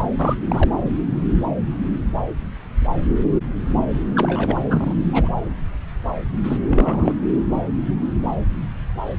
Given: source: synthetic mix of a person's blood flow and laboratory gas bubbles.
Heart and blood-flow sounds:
Doppler ultrasound of blood flow; subclavian vein
0.00-0.08 s: bubbles
0.19-0.35 s: bubbles
0.48-0.70 s: bubbles
4.15-4.60 s: bubbles
4.68-4.95 s: bubbles
5.12-5.29 s: bubbles
6.44-6.57 s: bubbles
6.68-7.12 s: bubbles
From the record:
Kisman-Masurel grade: 222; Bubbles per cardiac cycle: several, 3 to 8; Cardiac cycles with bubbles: 10 to 50%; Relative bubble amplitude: moderate (0.250 to 0.450); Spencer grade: 2 (many but less than half of the cardiac periods contain bubble signals, singularly or in groups); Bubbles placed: anywhere in the cardiac cycle

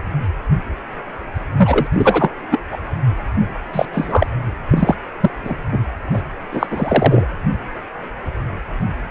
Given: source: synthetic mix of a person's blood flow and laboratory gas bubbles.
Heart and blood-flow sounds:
Doppler ultrasound of blood flow; precordium
1.57-1.87 s: bubbles
1.92-2.32 s: bubbles
2.51-2.60 s: bubbles
2.71-2.78 s: bubbles
3.73-3.86 s: bubbles
3.93-4.27 s: bubbles
4.70-4.96 s: bubbles
5.21-5.31 s: bubbles
5.45-5.55 s: bubbles
5.72-5.80 s: bubbles
6.14-6.22 s: bubbles
6.52-6.67 s: bubbles
6.70-7.26 s: bubbles
From the record:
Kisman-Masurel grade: 233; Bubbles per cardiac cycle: several, 3 to 8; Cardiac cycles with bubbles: 50 to 99%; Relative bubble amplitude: loud (0.450 to 0.775); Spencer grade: 3 (all of the cardiac periods contain showers or single bubble signals, but not dominating or overriding the cardiac motion signals); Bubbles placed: anywhere in the cardiac cycle

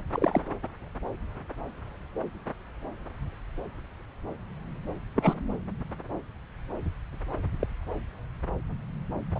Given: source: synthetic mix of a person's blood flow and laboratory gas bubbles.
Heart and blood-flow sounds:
Doppler ultrasound of blood flow; subclavian vein
0.12-0.41 s: bubbles
5.16-5.33 s: bubbles
7.60-7.67 s: bubbles
9.35-9.39 s: bubbles
From the record:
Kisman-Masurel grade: 121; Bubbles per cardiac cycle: 1 to 2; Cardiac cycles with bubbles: 10 to 50%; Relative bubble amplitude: barely perceptible (0.100 to 0.250); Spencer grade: 2 (many but less than half of the cardiac periods contain bubble signals, singularly or in groups); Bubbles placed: anywhere in the cardiac cycle

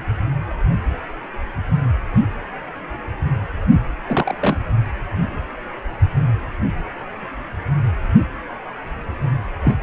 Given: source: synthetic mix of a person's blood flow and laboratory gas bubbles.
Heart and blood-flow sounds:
Doppler ultrasound of blood flow; precordium
4.07-4.35 s: bubbles
4.41-4.57 s: bubbles
9.63-9.76 s: bubbles
From the record:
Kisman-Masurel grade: 123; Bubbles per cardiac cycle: 1 to 2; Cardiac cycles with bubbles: 10 to 50%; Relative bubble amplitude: loud (0.450 to 0.775); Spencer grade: 2 (many but less than half of the cardiac periods contain bubble signals, singularly or in groups); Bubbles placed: anywhere in the cardiac cycle

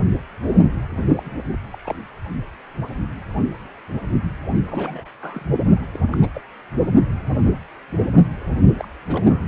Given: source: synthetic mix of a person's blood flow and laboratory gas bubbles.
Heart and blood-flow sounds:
Doppler ultrasound of blood flow; precordium
1.15-1.57 s: bubbles
1.72-1.96 s: bubbles
4.68-5.09 s: bubbles
5.21-5.45 s: bubbles
5.93-5.99 s: bubbles
6.12-6.17 s: bubbles
6.21-6.28 s: bubbles
6.33-6.41 s: bubbles
8.74-8.88 s: bubbles
9.06-9.41 s: bubbles
From the record:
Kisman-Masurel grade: 221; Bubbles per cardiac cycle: several, 3 to 8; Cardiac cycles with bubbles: 10 to 50%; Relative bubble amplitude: barely perceptible (0.100 to 0.250); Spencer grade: 2 (many but less than half of the cardiac periods contain bubble signals, singularly or in groups); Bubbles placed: only in the low amplitude regions of the cardiac cycle

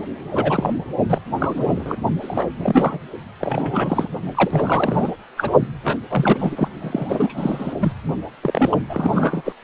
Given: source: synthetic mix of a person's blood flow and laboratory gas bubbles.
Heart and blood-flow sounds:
Doppler ultrasound of blood flow; precordium
0.00-0.04 s: bubbles
0.31-0.74 s: bubbles
1.08-1.22 s: bubbles
1.39-1.97 s: bubbles
2.21-2.46 s: bubbles
2.58-2.99 s: bubbles
3.40-4.09 s: bubbles
4.34-5.10 s: bubbles
5.37-5.51 s: bubbles
5.83-5.97 s: bubbles
6.09-6.68 s: bubbles
6.80-7.73 s: bubbles
7.79-7.92 s: bubbles
8.42-8.77 s: bubbles
8.89-9.42 s: bubbles
9.45-9.53 s: bubbles
From the record:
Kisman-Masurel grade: 343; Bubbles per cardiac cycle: rolling drumbeat, 9 or more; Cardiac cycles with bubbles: 100%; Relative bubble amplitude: loud (0.450 to 0.775); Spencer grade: 3 (all of the cardiac periods contain showers or single bubble signals, but not dominating or overriding the cardiac motion signals); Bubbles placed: only in the low amplitude regions of the cardiac cycle

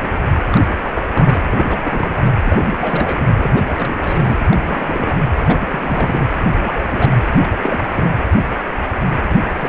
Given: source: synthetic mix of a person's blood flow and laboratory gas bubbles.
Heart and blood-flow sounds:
Doppler ultrasound of blood flow; precordium
0.52-0.63 s: bubbles
0.79-1.02 s: bubbles
1.11-1.43 s: bubbles
1.51-1.66 s: bubbles
1.69-2.23 s: bubbles
2.45-2.64 s: bubbles
2.72-3.19 s: bubbles
3.36-3.61 s: bubbles
3.66-4.34 s: bubbles
4.50-4.58 s: bubbles
4.64-5.15 s: bubbles
5.35-6.31 s: bubbles
6.50-7.16 s: bubbles
7.43-7.48 s: bubbles
7.62-8.11 s: bubbles
9.29-9.36 s: bubbles
9.57-9.69 s: bubbles
From the record:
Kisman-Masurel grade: 332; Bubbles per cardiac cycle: rolling drumbeat, 9 or more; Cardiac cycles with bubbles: 50 to 99%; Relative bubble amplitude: moderate (0.250 to 0.450); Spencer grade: 3 (all of the cardiac periods contain showers or single bubble signals, but not dominating or overriding the cardiac motion signals); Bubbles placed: anywhere in the cardiac cycle

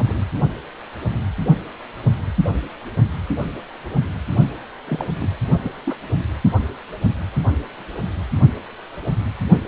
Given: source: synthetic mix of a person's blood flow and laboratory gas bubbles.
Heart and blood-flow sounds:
Doppler ultrasound of blood flow; precordium
0.09-0.19 s: bubbles
4.88-5.07 s: bubbles
5.20-5.28 s: bubbles
5.63-5.72 s: bubbles
5.85-5.96 s: bubbles
From the record:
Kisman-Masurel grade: 221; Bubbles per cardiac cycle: several, 3 to 8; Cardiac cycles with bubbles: 10 to 50%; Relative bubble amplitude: barely perceptible (0.100 to 0.250); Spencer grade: 2 (many but less than half of the cardiac periods contain bubble signals, singularly or in groups); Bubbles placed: anywhere in the cardiac cycle

